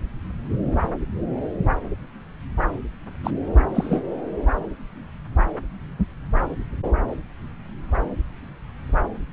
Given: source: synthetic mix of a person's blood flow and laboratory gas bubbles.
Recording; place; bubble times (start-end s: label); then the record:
Doppler ultrasound of blood flow; subclavian vein
3.24-3.30 s: bubbles
3.75-4.02 s: bubbles
From the record:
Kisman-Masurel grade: 122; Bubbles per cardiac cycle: 1 to 2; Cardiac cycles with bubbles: 10 to 50%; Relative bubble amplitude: moderate (0.250 to 0.450); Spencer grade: 2 (many but less than half of the cardiac periods contain bubble signals, singularly or in groups); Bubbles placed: anywhere in the cardiac cycle